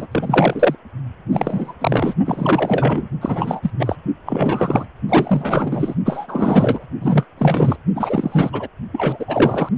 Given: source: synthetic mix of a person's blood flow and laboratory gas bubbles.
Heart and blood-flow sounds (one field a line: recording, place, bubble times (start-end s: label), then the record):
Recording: Doppler ultrasound of blood flow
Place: precordium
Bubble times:
0.00-0.07 s: bubbles
0.11-0.75 s: bubbles
1.30-1.73 s: bubbles
1.81-2.14 s: bubbles
2.25-3.08 s: bubbles
3.21-3.71 s: bubbles
3.79-3.96 s: bubbles
4.25-4.85 s: bubbles
5.08-5.96 s: bubbles
6.05-6.85 s: bubbles
7.01-7.26 s: bubbles
7.38-7.76 s: bubbles
7.95-8.68 s: bubbles
8.92-9.69 s: bubbles
From the record:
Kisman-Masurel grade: 333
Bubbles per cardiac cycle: rolling drumbeat, 9 or more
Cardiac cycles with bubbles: 50 to 99%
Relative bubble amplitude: loud (0.450 to 0.775)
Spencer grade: 3 (all of the cardiac periods contain showers or single bubble signals, but not dominating or overriding the cardiac motion signals)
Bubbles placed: only in the low amplitude regions of the cardiac cycle